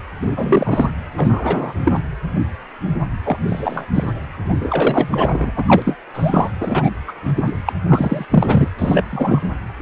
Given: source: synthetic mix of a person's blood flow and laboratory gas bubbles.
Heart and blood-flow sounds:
Doppler ultrasound of blood flow; precordium
0.22-0.90 s: bubbles
1.17-1.73 s: bubbles
1.84-2.00 s: bubbles
3.23-3.37 s: bubbles
3.47-3.86 s: bubbles
3.93-4.13 s: bubbles
4.44-5.52 s: bubbles
5.56-5.63 s: bubbles
5.66-5.82 s: bubbles
5.84-5.96 s: bubbles
6.13-6.51 s: bubbles
6.60-6.89 s: bubbles
7.08-7.12 s: bubbles
7.25-7.32 s: bubbles
7.37-7.53 s: bubbles
7.66-7.72 s: bubbles
7.88-8.26 s: bubbles
8.30-8.68 s: bubbles
8.78-9.04 s: bubbles
9.10-9.47 s: bubbles
From the record:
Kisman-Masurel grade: 233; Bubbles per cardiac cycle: several, 3 to 8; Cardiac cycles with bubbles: 50 to 99%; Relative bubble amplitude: loud (0.450 to 0.775); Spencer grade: 3 (all of the cardiac periods contain showers or single bubble signals, but not dominating or overriding the cardiac motion signals); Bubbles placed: anywhere in the cardiac cycle

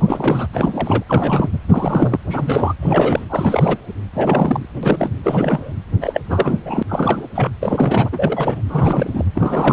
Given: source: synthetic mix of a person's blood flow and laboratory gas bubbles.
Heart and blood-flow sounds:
Doppler ultrasound of blood flow; precordium
0.00-0.47 s: bubbles
0.53-1.03 s: bubbles
1.08-1.48 s: bubbles
1.52-1.58 s: bubbles
1.69-2.19 s: bubbles
2.29-2.73 s: bubbles
2.79-3.27 s: bubbles
3.29-3.77 s: bubbles
4.13-4.66 s: bubbles
4.83-5.12 s: bubbles
5.24-5.73 s: bubbles
6.01-6.21 s: bubbles
6.29-6.58 s: bubbles
6.65-6.83 s: bubbles
6.88-7.28 s: bubbles
7.35-7.51 s: bubbles
7.62-8.10 s: bubbles
8.12-8.62 s: bubbles
8.69-9.24 s: bubbles
9.35-9.73 s: bubbles
From the record:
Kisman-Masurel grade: 342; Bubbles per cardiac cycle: rolling drumbeat, 9 or more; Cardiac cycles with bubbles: 100%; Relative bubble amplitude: moderate (0.250 to 0.450); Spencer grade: 3 (all of the cardiac periods contain showers or single bubble signals, but not dominating or overriding the cardiac motion signals); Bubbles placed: anywhere in the cardiac cycle

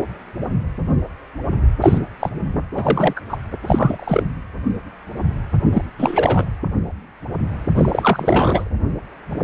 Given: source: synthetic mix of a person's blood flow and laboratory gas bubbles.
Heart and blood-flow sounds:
Doppler ultrasound of blood flow; precordium
1.81-1.99 s: bubbles
2.19-2.29 s: bubbles
2.74-3.21 s: bubbles
3.28-3.37 s: bubbles
3.63-4.23 s: bubbles
5.72-5.83 s: bubbles
5.98-6.46 s: bubbles
7.74-8.70 s: bubbles
From the record:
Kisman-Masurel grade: 223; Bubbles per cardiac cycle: several, 3 to 8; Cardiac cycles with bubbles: 10 to 50%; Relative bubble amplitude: loud (0.450 to 0.775); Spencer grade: 2 (many but less than half of the cardiac periods contain bubble signals, singularly or in groups); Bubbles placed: anywhere in the cardiac cycle

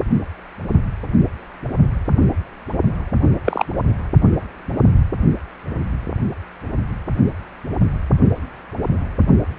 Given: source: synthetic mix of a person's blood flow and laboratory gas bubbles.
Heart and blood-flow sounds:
Doppler ultrasound of blood flow; precordium
3.44-3.65 s: bubbles
From the record:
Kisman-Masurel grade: 123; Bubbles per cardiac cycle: 1 to 2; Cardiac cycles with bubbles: 10 to 50%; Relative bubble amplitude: loud (0.450 to 0.775); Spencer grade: 2 (many but less than half of the cardiac periods contain bubble signals, singularly or in groups); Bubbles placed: only in the low amplitude regions of the cardiac cycle

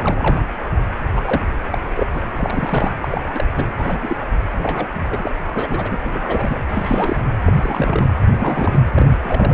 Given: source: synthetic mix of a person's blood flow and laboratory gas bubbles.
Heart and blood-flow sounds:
Doppler ultrasound of blood flow; precordium
0.00-0.43 s: bubbles
1.15-1.45 s: bubbles
1.71-1.78 s: bubbles
1.96-2.06 s: bubbles
2.14-2.21 s: bubbles
2.36-2.94 s: bubbles
3.00-3.08 s: bubbles
3.11-3.44 s: bubbles
3.54-3.67 s: bubbles
3.78-3.98 s: bubbles
4.02-4.16 s: bubbles
4.57-4.87 s: bubbles
4.94-4.99 s: bubbles
5.10-5.30 s: bubbles
5.54-5.98 s: bubbles
6.03-6.60 s: bubbles
6.71-7.16 s: bubbles
7.45-8.13 s: bubbles
8.30-8.79 s: bubbles
8.95-9.18 s: bubbles
9.22-9.54 s: bubbles
From the record:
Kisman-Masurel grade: 242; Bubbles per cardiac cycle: several, 3 to 8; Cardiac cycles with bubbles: 100%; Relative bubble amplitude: moderate (0.250 to 0.450); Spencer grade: 3 (all of the cardiac periods contain showers or single bubble signals, but not dominating or overriding the cardiac motion signals); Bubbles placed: anywhere in the cardiac cycle

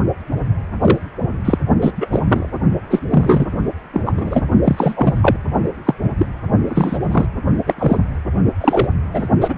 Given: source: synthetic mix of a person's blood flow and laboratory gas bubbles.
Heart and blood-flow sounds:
Doppler ultrasound of blood flow; precordium
0.81-0.99 s: bubbles
1.45-1.58 s: bubbles
1.81-1.93 s: bubbles
1.97-2.08 s: bubbles
2.11-2.47 s: bubbles
2.90-2.99 s: bubbles
3.11-3.46 s: bubbles
3.93-4.02 s: bubbles
4.05-4.12 s: bubbles
4.17-4.43 s: bubbles
4.64-5.37 s: bubbles
5.85-5.94 s: bubbles
6.04-6.09 s: bubbles
6.18-6.26 s: bubbles
6.68-6.99 s: bubbles
7.12-7.26 s: bubbles
7.66-7.74 s: bubbles
7.78-8.00 s: bubbles
8.61-8.88 s: bubbles
9.13-9.27 s: bubbles
9.41-9.55 s: bubbles
From the record:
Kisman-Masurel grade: 243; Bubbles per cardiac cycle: several, 3 to 8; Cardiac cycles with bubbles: 100%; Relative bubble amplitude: loud (0.450 to 0.775); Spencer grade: 3 (all of the cardiac periods contain showers or single bubble signals, but not dominating or overriding the cardiac motion signals); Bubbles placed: only in the low amplitude regions of the cardiac cycle

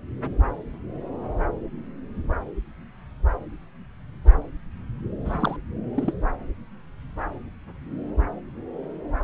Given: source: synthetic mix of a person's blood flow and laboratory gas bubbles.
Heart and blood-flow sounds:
Doppler ultrasound of blood flow; subclavian vein
5.25-5.56 s: bubbles
5.95-6.13 s: bubbles
From the record:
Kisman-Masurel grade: 222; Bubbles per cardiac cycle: several, 3 to 8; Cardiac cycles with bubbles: 10 to 50%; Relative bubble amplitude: moderate (0.250 to 0.450); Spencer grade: 2 (many but less than half of the cardiac periods contain bubble signals, singularly or in groups); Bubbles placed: anywhere in the cardiac cycle

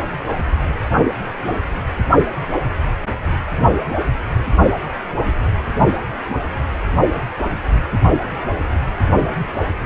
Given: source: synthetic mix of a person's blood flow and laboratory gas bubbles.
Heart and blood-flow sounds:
Doppler ultrasound of blood flow; precordium
no bubbles
From the record:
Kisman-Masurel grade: 000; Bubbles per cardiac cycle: 0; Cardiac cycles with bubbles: 0%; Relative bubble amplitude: no bubbles discernible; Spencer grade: 0 (complete lack of bubble signals)

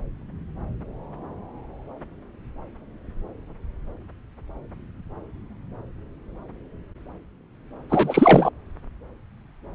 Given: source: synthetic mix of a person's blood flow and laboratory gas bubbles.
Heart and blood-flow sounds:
Doppler ultrasound of blood flow; subclavian vein
7.89-8.49 s: bubbles
From the record:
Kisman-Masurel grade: 213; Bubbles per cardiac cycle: several, 3 to 8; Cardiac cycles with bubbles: 1 to 10%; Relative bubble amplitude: loud (0.450 to 0.775); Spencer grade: 1 (occasional bubble signal discernible with the cardiac motion signal, with majority of cardiac periods free of bubbles); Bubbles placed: anywhere in the cardiac cycle

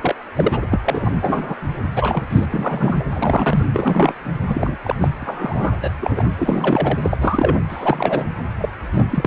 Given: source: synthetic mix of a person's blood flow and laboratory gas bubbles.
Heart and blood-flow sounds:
Doppler ultrasound of blood flow; precordium
0.01-0.15 s: bubbles
0.35-0.67 s: bubbles
0.70-0.80 s: bubbles
0.84-1.55 s: bubbles
1.96-2.23 s: bubbles
2.30-2.46 s: bubbles
2.50-3.04 s: bubbles
3.14-3.65 s: bubbles
3.74-4.14 s: bubbles
4.47-4.77 s: bubbles
4.84-4.96 s: bubbles
5.01-5.08 s: bubbles
5.22-5.73 s: bubbles
5.81-5.90 s: bubbles
5.99-6.26 s: bubbles
6.37-6.99 s: bubbles
7.02-7.18 s: bubbles
7.21-7.56 s: bubbles
7.69-8.25 s: bubbles
8.59-8.69 s: bubbles
8.93-9.05 s: bubbles
9.11-9.27 s: bubbles
From the record:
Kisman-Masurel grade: 233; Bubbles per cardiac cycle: several, 3 to 8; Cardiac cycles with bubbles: 50 to 99%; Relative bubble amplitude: loud (0.450 to 0.775); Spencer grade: 3 (all of the cardiac periods contain showers or single bubble signals, but not dominating or overriding the cardiac motion signals); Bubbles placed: anywhere in the cardiac cycle

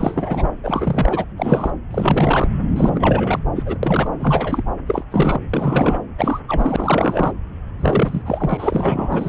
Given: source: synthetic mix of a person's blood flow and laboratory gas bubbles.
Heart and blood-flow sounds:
Doppler ultrasound of blood flow; subclavian vein
0.00-0.49 s: bubbles
0.63-1.25 s: bubbles
1.38-1.70 s: bubbles
1.91-2.49 s: bubbles
2.76-3.39 s: bubbles
3.56-3.63 s: bubbles
3.66-3.78 s: bubbles
3.83-4.11 s: bubbles
4.20-4.63 s: bubbles
4.88-5.03 s: bubbles
5.11-5.39 s: bubbles
5.50-5.99 s: bubbles
6.18-6.40 s: bubbles
6.48-7.32 s: bubbles
7.80-8.22 s: bubbles
8.25-9.29 s: bubbles
From the record:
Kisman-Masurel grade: 342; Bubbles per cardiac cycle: rolling drumbeat, 9 or more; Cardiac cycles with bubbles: 100%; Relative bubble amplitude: moderate (0.250 to 0.450); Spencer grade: 3 (all of the cardiac periods contain showers or single bubble signals, but not dominating or overriding the cardiac motion signals); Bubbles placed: anywhere in the cardiac cycle

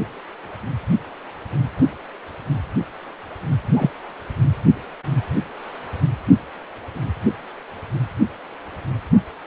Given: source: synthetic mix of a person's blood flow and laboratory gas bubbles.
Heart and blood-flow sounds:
Doppler ultrasound of blood flow; precordium
3.74-3.90 s: bubbles
From the record:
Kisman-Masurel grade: 113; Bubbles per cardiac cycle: 1 to 2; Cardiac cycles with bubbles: 1 to 10%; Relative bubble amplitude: loud (0.450 to 0.775); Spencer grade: 1 (occasional bubble signal discernible with the cardiac motion signal, with majority of cardiac periods free of bubbles); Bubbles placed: anywhere in the cardiac cycle

